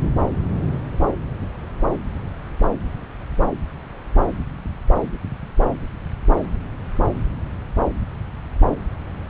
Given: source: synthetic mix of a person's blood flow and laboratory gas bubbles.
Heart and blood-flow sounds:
Doppler ultrasound of blood flow; subclavian vein
no bubbles
From the record:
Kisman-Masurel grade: 000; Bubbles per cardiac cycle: 0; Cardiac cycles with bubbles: 0%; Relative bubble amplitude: no bubbles discernible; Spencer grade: 0 (complete lack of bubble signals)

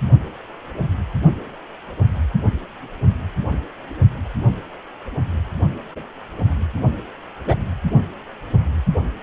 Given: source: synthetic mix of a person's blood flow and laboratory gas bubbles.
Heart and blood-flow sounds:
Doppler ultrasound of blood flow; precordium
7.46-7.55 s: bubbles
From the record:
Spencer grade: 1 (occasional bubble signal discernible with the cardiac motion signal, with majority of cardiac periods free of bubbles); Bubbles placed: only in the low amplitude regions of the cardiac cycle

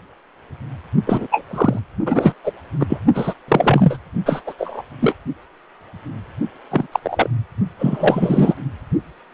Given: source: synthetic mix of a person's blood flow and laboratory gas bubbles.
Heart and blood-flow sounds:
Doppler ultrasound of blood flow; precordium
1.06-1.27 s: bubbles
1.31-1.43 s: bubbles
1.50-1.79 s: bubbles
2.05-2.33 s: bubbles
2.44-2.52 s: bubbles
2.80-2.98 s: bubbles
3.14-3.34 s: bubbles
3.48-3.98 s: bubbles
4.25-4.42 s: bubbles
4.46-4.54 s: bubbles
4.58-4.82 s: bubbles
5.00-5.16 s: bubbles
6.71-6.87 s: bubbles
6.92-7.00 s: bubbles
7.04-7.29 s: bubbles
7.79-8.54 s: bubbles
From the record:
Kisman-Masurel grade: 233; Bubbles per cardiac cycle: several, 3 to 8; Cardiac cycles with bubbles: 50 to 99%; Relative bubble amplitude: loud (0.450 to 0.775); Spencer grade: 3 (all of the cardiac periods contain showers or single bubble signals, but not dominating or overriding the cardiac motion signals); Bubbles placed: only in the low amplitude regions of the cardiac cycle

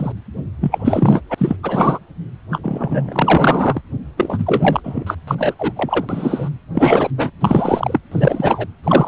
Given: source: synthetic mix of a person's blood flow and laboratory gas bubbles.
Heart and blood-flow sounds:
Doppler ultrasound of blood flow; precordium
0.00-0.12 s: bubbles
0.60-1.21 s: bubbles
1.29-1.34 s: bubbles
1.38-1.57 s: bubbles
1.63-1.99 s: bubbles
2.51-2.60 s: bubbles
2.63-3.82 s: bubbles
4.17-4.80 s: bubbles
4.84-5.15 s: bubbles
5.27-5.35 s: bubbles
5.38-5.54 s: bubbles
5.58-5.73 s: bubbles
5.75-6.05 s: bubbles
6.08-6.50 s: bubbles
6.75-7.10 s: bubbles
7.17-7.30 s: bubbles
7.40-7.98 s: bubbles
8.12-8.66 s: bubbles
8.83-9.08 s: bubbles
From the record:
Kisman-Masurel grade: 243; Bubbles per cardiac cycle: several, 3 to 8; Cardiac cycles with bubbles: 100%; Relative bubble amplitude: loud (0.450 to 0.775); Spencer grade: 3 (all of the cardiac periods contain showers or single bubble signals, but not dominating or overriding the cardiac motion signals); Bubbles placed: anywhere in the cardiac cycle

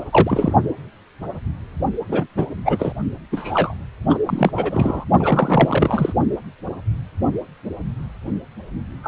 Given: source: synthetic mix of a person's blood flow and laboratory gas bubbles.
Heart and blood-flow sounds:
Doppler ultrasound of blood flow; precordium
0.00-0.04 s: bubbles
0.12-0.53 s: bubbles
2.08-2.26 s: bubbles
2.36-2.46 s: bubbles
2.64-2.93 s: bubbles
3.32-3.74 s: bubbles
4.09-4.18 s: bubbles
4.25-4.51 s: bubbles
4.55-5.04 s: bubbles
5.19-6.13 s: bubbles
9.03-9.08 s: bubbles
From the record:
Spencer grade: 3 (all of the cardiac periods contain showers or single bubble signals, but not dominating or overriding the cardiac motion signals); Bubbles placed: only in the low amplitude regions of the cardiac cycle

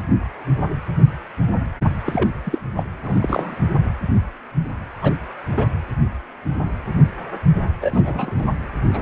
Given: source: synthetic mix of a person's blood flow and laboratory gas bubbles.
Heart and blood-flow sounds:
Doppler ultrasound of blood flow; precordium
2.05-2.30 s: bubbles
2.44-2.58 s: bubbles
2.76-2.83 s: bubbles
3.04-3.55 s: bubbles
5.02-5.14 s: bubbles
5.52-5.67 s: bubbles
7.81-8.46 s: bubbles
8.93-9.02 s: bubbles
From the record:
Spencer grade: 2 (many but less than half of the cardiac periods contain bubble signals, singularly or in groups); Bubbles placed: anywhere in the cardiac cycle

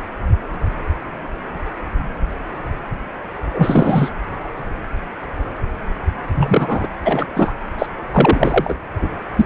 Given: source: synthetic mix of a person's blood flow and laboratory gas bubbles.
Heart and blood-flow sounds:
Doppler ultrasound of blood flow; precordium
3.54-4.11 s: bubbles
6.35-6.88 s: bubbles
7.05-7.26 s: bubbles
7.35-7.52 s: bubbles
7.79-7.86 s: bubbles
8.11-8.76 s: bubbles
9.35-9.46 s: bubbles
From the record:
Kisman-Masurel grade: 223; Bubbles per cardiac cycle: several, 3 to 8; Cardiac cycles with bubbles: 10 to 50%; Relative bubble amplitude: loud (0.450 to 0.775); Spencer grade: 2 (many but less than half of the cardiac periods contain bubble signals, singularly or in groups); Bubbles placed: anywhere in the cardiac cycle

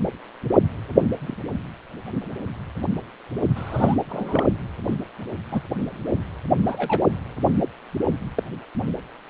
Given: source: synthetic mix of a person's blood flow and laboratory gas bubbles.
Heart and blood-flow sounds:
Doppler ultrasound of blood flow; precordium
1.20-1.35 s: bubbles
3.55-3.96 s: bubbles
4.09-4.45 s: bubbles
4.86-4.94 s: bubbles
5.52-5.62 s: bubbles
6.67-7.06 s: bubbles
8.35-8.43 s: bubbles
From the record:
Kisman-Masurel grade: 121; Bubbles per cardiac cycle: 1 to 2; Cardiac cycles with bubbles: 10 to 50%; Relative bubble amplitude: barely perceptible (0.100 to 0.250); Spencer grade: 2 (many but less than half of the cardiac periods contain bubble signals, singularly or in groups); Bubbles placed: anywhere in the cardiac cycle

